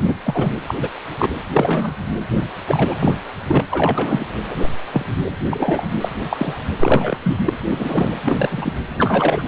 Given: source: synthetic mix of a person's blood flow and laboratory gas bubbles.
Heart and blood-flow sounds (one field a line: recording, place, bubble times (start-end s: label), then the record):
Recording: Doppler ultrasound of blood flow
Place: precordium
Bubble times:
0.07-0.15 s: bubbles
0.24-0.51 s: bubbles
0.68-0.74 s: bubbles
0.78-0.90 s: bubbles
1.09-1.29 s: bubbles
1.53-1.93 s: bubbles
2.67-3.13 s: bubbles
3.48-3.65 s: bubbles
3.70-4.27 s: bubbles
4.50-4.56 s: bubbles
4.63-4.69 s: bubbles
4.93-5.05 s: bubbles
5.50-5.88 s: bubbles
6.01-6.08 s: bubbles
6.30-6.54 s: bubbles
6.79-7.18 s: bubbles
7.23-7.37 s: bubbles
7.46-7.54 s: bubbles
7.70-8.12 s: bubbles
8.25-8.73 s: bubbles
8.86-9.46 s: bubbles
From the record:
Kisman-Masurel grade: 243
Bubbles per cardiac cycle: several, 3 to 8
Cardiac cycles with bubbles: 100%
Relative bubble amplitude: loud (0.450 to 0.775)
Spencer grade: 3 (all of the cardiac periods contain showers or single bubble signals, but not dominating or overriding the cardiac motion signals)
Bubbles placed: anywhere in the cardiac cycle